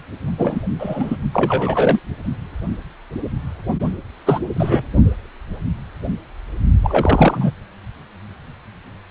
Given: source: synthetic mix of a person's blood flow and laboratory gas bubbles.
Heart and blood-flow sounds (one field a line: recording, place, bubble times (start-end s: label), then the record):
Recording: Doppler ultrasound of blood flow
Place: precordium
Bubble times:
0.38-0.61 s: bubbles
0.79-1.17 s: bubbles
1.33-1.99 s: bubbles
4.26-4.40 s: bubbles
4.54-4.85 s: bubbles
6.83-7.52 s: bubbles
From the record:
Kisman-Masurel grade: 233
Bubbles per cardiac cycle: several, 3 to 8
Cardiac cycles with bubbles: 50 to 99%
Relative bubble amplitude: loud (0.450 to 0.775)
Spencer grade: 3 (all of the cardiac periods contain showers or single bubble signals, but not dominating or overriding the cardiac motion signals)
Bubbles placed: only in the low amplitude regions of the cardiac cycle